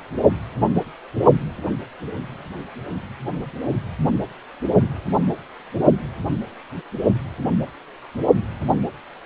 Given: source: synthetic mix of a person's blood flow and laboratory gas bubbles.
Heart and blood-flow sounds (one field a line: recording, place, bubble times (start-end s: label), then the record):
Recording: Doppler ultrasound of blood flow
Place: precordium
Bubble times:
no bubbles
From the record:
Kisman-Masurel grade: 000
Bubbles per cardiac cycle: 0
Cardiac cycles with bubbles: 0%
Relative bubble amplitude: no bubbles discernible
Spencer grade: 0 (complete lack of bubble signals)